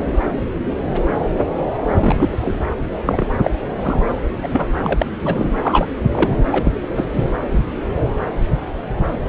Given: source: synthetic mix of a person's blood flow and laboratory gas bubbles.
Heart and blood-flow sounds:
Doppler ultrasound of blood flow; subclavian vein
0.00-0.04 s: bubbles
1.96-2.60 s: bubbles
3.06-3.31 s: bubbles
3.42-3.51 s: bubbles
3.82-4.00 s: bubbles
4.42-4.48 s: bubbles
4.53-4.67 s: bubbles
4.82-5.06 s: bubbles
5.23-5.54 s: bubbles
5.62-5.88 s: bubbles
6.08-6.37 s: bubbles
6.52-6.73 s: bubbles
6.95-7.05 s: bubbles
7.13-7.29 s: bubbles
9.25-9.29 s: bubbles
From the record:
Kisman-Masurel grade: 233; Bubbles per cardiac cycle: several, 3 to 8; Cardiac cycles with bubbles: 50 to 99%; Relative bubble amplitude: loud (0.450 to 0.775); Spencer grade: 3 (all of the cardiac periods contain showers or single bubble signals, but not dominating or overriding the cardiac motion signals); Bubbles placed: anywhere in the cardiac cycle

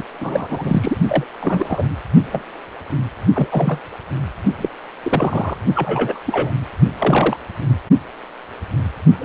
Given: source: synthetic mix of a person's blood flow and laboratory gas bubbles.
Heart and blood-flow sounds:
Doppler ultrasound of blood flow; precordium
0.00-0.04 s: bubbles
0.20-0.97 s: bubbles
1.07-1.24 s: bubbles
1.40-1.95 s: bubbles
2.32-2.43 s: bubbles
3.35-3.80 s: bubbles
4.58-4.69 s: bubbles
5.03-5.58 s: bubbles
5.75-6.20 s: bubbles
6.26-6.52 s: bubbles
6.99-7.37 s: bubbles
9.19-9.25 s: bubbles
From the record:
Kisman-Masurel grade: 232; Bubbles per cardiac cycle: several, 3 to 8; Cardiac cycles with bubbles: 50 to 99%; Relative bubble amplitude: moderate (0.250 to 0.450); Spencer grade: 3 (all of the cardiac periods contain showers or single bubble signals, but not dominating or overriding the cardiac motion signals); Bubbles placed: only in the low amplitude regions of the cardiac cycle

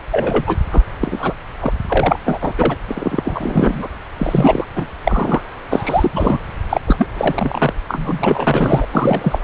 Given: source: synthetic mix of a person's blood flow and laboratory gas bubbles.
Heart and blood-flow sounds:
Doppler ultrasound of blood flow; subclavian vein
0.11-0.56 s: bubbles
0.71-0.83 s: bubbles
1.00-1.33 s: bubbles
1.60-1.71 s: bubbles
1.88-2.19 s: bubbles
2.25-2.38 s: bubbles
2.41-2.53 s: bubbles
2.58-2.77 s: bubbles
2.88-3.22 s: bubbles
3.25-3.87 s: bubbles
4.18-4.66 s: bubbles
4.75-4.87 s: bubbles
5.04-5.41 s: bubbles
5.69-6.39 s: bubbles
6.69-6.81 s: bubbles
6.87-7.07 s: bubbles
7.16-7.73 s: bubbles
7.88-8.85 s: bubbles
8.90-9.38 s: bubbles
9.42-9.44 s: bubbles
From the record:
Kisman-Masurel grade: 333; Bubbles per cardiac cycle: rolling drumbeat, 9 or more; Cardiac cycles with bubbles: 50 to 99%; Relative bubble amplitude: loud (0.450 to 0.775); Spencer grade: 3 (all of the cardiac periods contain showers or single bubble signals, but not dominating or overriding the cardiac motion signals); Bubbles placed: anywhere in the cardiac cycle

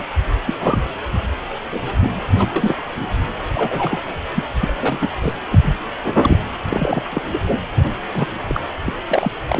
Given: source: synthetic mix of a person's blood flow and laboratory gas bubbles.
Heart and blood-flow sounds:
Doppler ultrasound of blood flow; precordium
0.00-0.02 s: bubbles
0.46-0.54 s: bubbles
0.59-0.82 s: bubbles
1.70-1.81 s: bubbles
2.02-2.12 s: bubbles
2.38-2.48 s: bubbles
2.55-2.75 s: bubbles
3.54-4.01 s: bubbles
4.34-4.43 s: bubbles
4.60-4.74 s: bubbles
4.80-4.99 s: bubbles
5.01-5.08 s: bubbles
5.21-5.37 s: bubbles
5.51-5.74 s: bubbles
6.21-6.38 s: bubbles
6.70-7.22 s: bubbles
7.33-7.38 s: bubbles
7.46-7.61 s: bubbles
7.76-7.89 s: bubbles
8.12-8.28 s: bubbles
8.48-8.61 s: bubbles
8.86-8.93 s: bubbles
9.08-9.31 s: bubbles
9.48-9.60 s: bubbles
From the record:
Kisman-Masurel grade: 242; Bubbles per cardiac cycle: several, 3 to 8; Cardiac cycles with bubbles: 100%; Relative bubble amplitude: moderate (0.250 to 0.450); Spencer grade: 3 (all of the cardiac periods contain showers or single bubble signals, but not dominating or overriding the cardiac motion signals); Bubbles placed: anywhere in the cardiac cycle

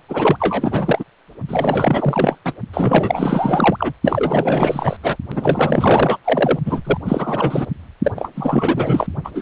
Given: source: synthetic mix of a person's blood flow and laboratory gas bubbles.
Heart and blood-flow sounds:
Doppler ultrasound of blood flow; precordium
0.08-1.04 s: bubbles
1.48-2.38 s: bubbles
2.45-2.54 s: bubbles
2.73-3.92 s: bubbles
4.04-4.97 s: bubbles
5.03-5.16 s: bubbles
5.31-6.17 s: bubbles
6.24-6.59 s: bubbles
6.65-6.81 s: bubbles
6.84-6.97 s: bubbles
7.05-7.67 s: bubbles
8.04-8.12 s: bubbles
8.16-8.29 s: bubbles
8.35-9.07 s: bubbles
9.24-9.31 s: bubbles
9.35-9.42 s: bubbles
From the record:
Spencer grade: 4 (maximum detectable bubble signal sounding continuously throughout systole and diastole of every cardiac period, and overriding the amplitude of the normal cardiac signals); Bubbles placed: only in the low amplitude regions of the cardiac cycle

